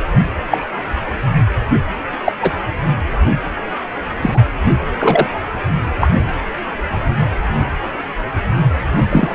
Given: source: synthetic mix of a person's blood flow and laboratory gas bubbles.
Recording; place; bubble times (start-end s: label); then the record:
Doppler ultrasound of blood flow; precordium
0.49-0.58 s: bubbles
2.25-2.33 s: bubbles
2.42-2.54 s: bubbles
4.22-4.40 s: bubbles
4.99-5.27 s: bubbles
5.99-6.08 s: bubbles
9.11-9.35 s: bubbles
From the record:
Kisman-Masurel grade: 123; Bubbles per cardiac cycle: 1 to 2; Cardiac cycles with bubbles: 10 to 50%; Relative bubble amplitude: loud (0.450 to 0.775); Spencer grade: 2 (many but less than half of the cardiac periods contain bubble signals, singularly or in groups); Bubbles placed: anywhere in the cardiac cycle